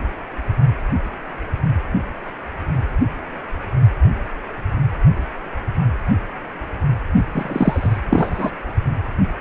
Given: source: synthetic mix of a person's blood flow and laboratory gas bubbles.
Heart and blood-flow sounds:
Doppler ultrasound of blood flow; precordium
7.32-7.98 s: bubbles
8.11-8.51 s: bubbles
From the record:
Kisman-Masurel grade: 213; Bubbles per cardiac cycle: several, 3 to 8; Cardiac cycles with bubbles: 1 to 10%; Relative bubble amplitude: loud (0.450 to 0.775); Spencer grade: 1 (occasional bubble signal discernible with the cardiac motion signal, with majority of cardiac periods free of bubbles); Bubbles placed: only in the low amplitude regions of the cardiac cycle

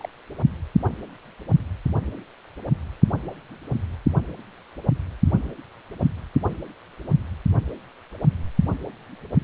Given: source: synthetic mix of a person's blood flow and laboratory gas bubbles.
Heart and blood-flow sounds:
Doppler ultrasound of blood flow; precordium
0.00-0.09 s: bubbles
From the record:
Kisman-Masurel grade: 111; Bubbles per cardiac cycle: 1 to 2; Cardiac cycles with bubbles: 1 to 10%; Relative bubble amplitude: barely perceptible (0.100 to 0.250); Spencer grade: 1 (occasional bubble signal discernible with the cardiac motion signal, with majority of cardiac periods free of bubbles); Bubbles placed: anywhere in the cardiac cycle

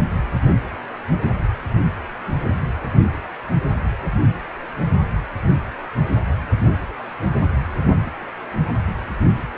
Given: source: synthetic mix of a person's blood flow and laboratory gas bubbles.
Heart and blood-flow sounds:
Doppler ultrasound of blood flow; precordium
no bubbles
From the record:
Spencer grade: 0 (complete lack of bubble signals)

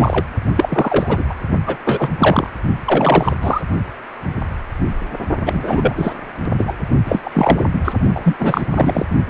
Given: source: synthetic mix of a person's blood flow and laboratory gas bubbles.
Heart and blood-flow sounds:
Doppler ultrasound of blood flow; precordium
0.00-0.26 s: bubbles
0.56-1.24 s: bubbles
1.29-1.34 s: bubbles
1.66-1.78 s: bubbles
1.84-2.17 s: bubbles
2.20-2.50 s: bubbles
2.84-3.37 s: bubbles
3.42-3.62 s: bubbles
5.46-6.13 s: bubbles
6.58-6.73 s: bubbles
7.05-7.21 s: bubbles
7.24-7.62 s: bubbles
7.73-7.80 s: bubbles
7.85-7.93 s: bubbles
8.13-8.36 s: bubbles
8.38-8.65 s: bubbles
8.72-9.06 s: bubbles
From the record:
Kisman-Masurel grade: 333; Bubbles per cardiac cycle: rolling drumbeat, 9 or more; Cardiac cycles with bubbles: 50 to 99%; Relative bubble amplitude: loud (0.450 to 0.775); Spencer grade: 3 (all of the cardiac periods contain showers or single bubble signals, but not dominating or overriding the cardiac motion signals); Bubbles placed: only in the low amplitude regions of the cardiac cycle

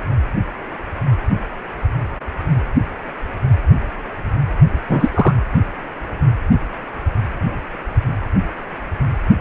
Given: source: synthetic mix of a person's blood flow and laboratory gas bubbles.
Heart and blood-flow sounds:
Doppler ultrasound of blood flow; precordium
4.89-5.09 s: bubbles
5.14-5.32 s: bubbles
From the record:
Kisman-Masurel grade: 213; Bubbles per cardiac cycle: several, 3 to 8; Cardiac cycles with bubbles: 1 to 10%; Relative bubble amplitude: loud (0.450 to 0.775); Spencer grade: 1 (occasional bubble signal discernible with the cardiac motion signal, with majority of cardiac periods free of bubbles); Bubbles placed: anywhere in the cardiac cycle

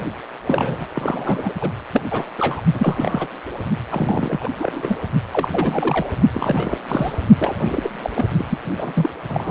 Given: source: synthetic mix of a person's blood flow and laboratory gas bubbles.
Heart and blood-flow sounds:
Doppler ultrasound of blood flow; precordium
0.00-0.05 s: bubbles
0.45-0.88 s: bubbles
0.93-1.53 s: bubbles
1.61-1.70 s: bubbles
1.92-2.02 s: bubbles
2.10-2.31 s: bubbles
2.38-2.61 s: bubbles
2.74-3.27 s: bubbles
3.91-4.49 s: bubbles
4.59-4.98 s: bubbles
5.33-5.49 s: bubbles
5.51-6.07 s: bubbles
6.34-6.78 s: bubbles
6.88-7.17 s: bubbles
7.39-7.90 s: bubbles
8.02-8.10 s: bubbles
8.14-8.26 s: bubbles
8.38-8.45 s: bubbles
8.49-8.57 s: bubbles
8.78-9.10 s: bubbles
9.28-9.51 s: bubbles
From the record:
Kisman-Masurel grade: 342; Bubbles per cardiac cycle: rolling drumbeat, 9 or more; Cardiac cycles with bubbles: 100%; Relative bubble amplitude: moderate (0.250 to 0.450); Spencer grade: 3 (all of the cardiac periods contain showers or single bubble signals, but not dominating or overriding the cardiac motion signals); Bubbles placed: only in the low amplitude regions of the cardiac cycle

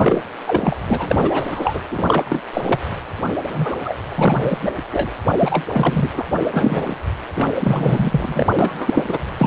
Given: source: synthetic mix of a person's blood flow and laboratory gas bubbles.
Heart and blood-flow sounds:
Doppler ultrasound of blood flow; precordium
0.00-0.22 s: bubbles
0.46-0.76 s: bubbles
0.88-1.81 s: bubbles
1.91-2.05 s: bubbles
2.08-2.43 s: bubbles
2.53-2.79 s: bubbles
3.53-3.75 s: bubbles
3.84-3.95 s: bubbles
4.08-4.58 s: bubbles
4.62-4.71 s: bubbles
4.92-5.10 s: bubbles
5.38-5.65 s: bubbles
5.72-6.10 s: bubbles
6.13-6.25 s: bubbles
6.51-6.96 s: bubbles
7.35-7.52 s: bubbles
7.60-8.46 s: bubbles
8.58-9.04 s: bubbles
9.07-9.18 s: bubbles
9.38-9.47 s: bubbles
From the record:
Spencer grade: 3 (all of the cardiac periods contain showers or single bubble signals, but not dominating or overriding the cardiac motion signals); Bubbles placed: anywhere in the cardiac cycle

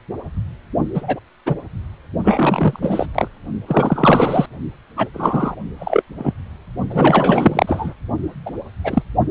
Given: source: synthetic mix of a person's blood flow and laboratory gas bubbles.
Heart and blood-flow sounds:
Doppler ultrasound of blood flow; precordium
0.94-1.19 s: bubbles
1.46-1.55 s: bubbles
2.23-2.79 s: bubbles
2.82-3.06 s: bubbles
3.15-3.27 s: bubbles
3.67-4.46 s: bubbles
4.96-5.08 s: bubbles
5.13-5.55 s: bubbles
5.78-6.02 s: bubbles
6.17-6.33 s: bubbles
6.89-7.94 s: bubbles
8.46-8.51 s: bubbles
8.84-9.02 s: bubbles
From the record:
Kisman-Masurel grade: 233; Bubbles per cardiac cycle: several, 3 to 8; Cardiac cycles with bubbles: 50 to 99%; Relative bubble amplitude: loud (0.450 to 0.775); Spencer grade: 3 (all of the cardiac periods contain showers or single bubble signals, but not dominating or overriding the cardiac motion signals); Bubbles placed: only in the low amplitude regions of the cardiac cycle

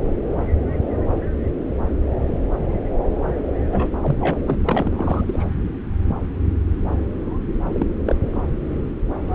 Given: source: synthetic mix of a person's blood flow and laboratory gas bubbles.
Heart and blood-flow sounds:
Doppler ultrasound of blood flow; subclavian vein
3.72-3.90 s: bubbles
4.03-4.38 s: bubbles
4.46-4.59 s: bubbles
4.66-5.45 s: bubbles
7.72-7.86 s: bubbles
8.05-8.16 s: bubbles
8.34-8.41 s: bubbles
From the record:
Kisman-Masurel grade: 222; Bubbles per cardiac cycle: several, 3 to 8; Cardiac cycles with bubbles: 10 to 50%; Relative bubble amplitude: moderate (0.250 to 0.450); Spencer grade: 2 (many but less than half of the cardiac periods contain bubble signals, singularly or in groups); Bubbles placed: anywhere in the cardiac cycle

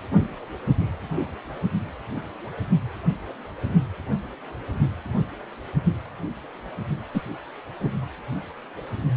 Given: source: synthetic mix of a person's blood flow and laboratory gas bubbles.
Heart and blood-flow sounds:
Doppler ultrasound of blood flow; precordium
7.13-7.21 s: bubbles
7.80-7.90 s: bubbles
From the record:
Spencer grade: 1 (occasional bubble signal discernible with the cardiac motion signal, with majority of cardiac periods free of bubbles); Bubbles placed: only in the low amplitude regions of the cardiac cycle

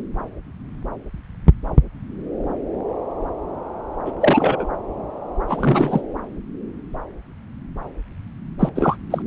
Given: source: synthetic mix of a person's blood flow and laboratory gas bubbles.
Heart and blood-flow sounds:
Doppler ultrasound of blood flow; subclavian vein
4.05-4.12 s: bubbles
4.21-4.67 s: bubbles
5.47-6.01 s: bubbles
8.59-8.69 s: bubbles
8.74-8.96 s: bubbles
9.11-9.22 s: bubbles
From the record:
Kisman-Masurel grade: 223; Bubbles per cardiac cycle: several, 3 to 8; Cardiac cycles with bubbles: 10 to 50%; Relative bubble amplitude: loud (0.450 to 0.775); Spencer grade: 2 (many but less than half of the cardiac periods contain bubble signals, singularly or in groups); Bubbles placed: anywhere in the cardiac cycle

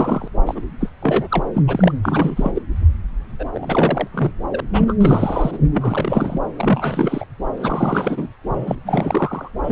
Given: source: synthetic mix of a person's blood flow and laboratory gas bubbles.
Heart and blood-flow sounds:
Doppler ultrasound of blood flow; subclavian vein
0.00-0.28 s: bubbles
0.46-0.65 s: bubbles
0.80-0.90 s: bubbles
1.02-1.44 s: bubbles
1.54-1.62 s: bubbles
1.67-1.92 s: bubbles
2.03-2.52 s: bubbles
2.55-2.62 s: bubbles
3.39-3.45 s: bubbles
3.54-4.08 s: bubbles
4.14-4.32 s: bubbles
4.52-4.61 s: bubbles
4.73-4.96 s: bubbles
5.00-5.58 s: bubbles
5.74-6.41 s: bubbles
6.57-7.25 s: bubbles
7.56-8.27 s: bubbles
8.53-8.76 s: bubbles
8.86-9.51 s: bubbles
9.62-9.72 s: bubbles
From the record:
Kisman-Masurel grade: 343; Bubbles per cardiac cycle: rolling drumbeat, 9 or more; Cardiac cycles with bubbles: 100%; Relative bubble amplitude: loud (0.450 to 0.775); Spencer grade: 3 (all of the cardiac periods contain showers or single bubble signals, but not dominating or overriding the cardiac motion signals); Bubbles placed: anywhere in the cardiac cycle

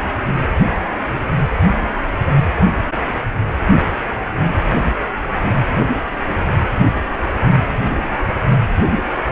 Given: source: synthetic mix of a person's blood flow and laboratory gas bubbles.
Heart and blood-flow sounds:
Doppler ultrasound of blood flow; precordium
no bubbles
From the record:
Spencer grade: 0 (complete lack of bubble signals)

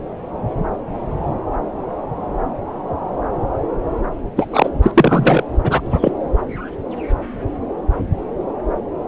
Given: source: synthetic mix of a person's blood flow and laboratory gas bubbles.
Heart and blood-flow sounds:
Doppler ultrasound of blood flow; subclavian vein
4.36-4.47 s: bubbles
4.51-4.69 s: bubbles
4.82-4.92 s: bubbles
4.94-5.44 s: bubbles
5.63-5.80 s: bubbles
5.83-6.12 s: bubbles
From the record:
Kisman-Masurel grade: 223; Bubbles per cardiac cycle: several, 3 to 8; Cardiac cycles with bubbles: 10 to 50%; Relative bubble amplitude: loud (0.450 to 0.775); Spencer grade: 2 (many but less than half of the cardiac periods contain bubble signals, singularly or in groups); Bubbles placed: anywhere in the cardiac cycle

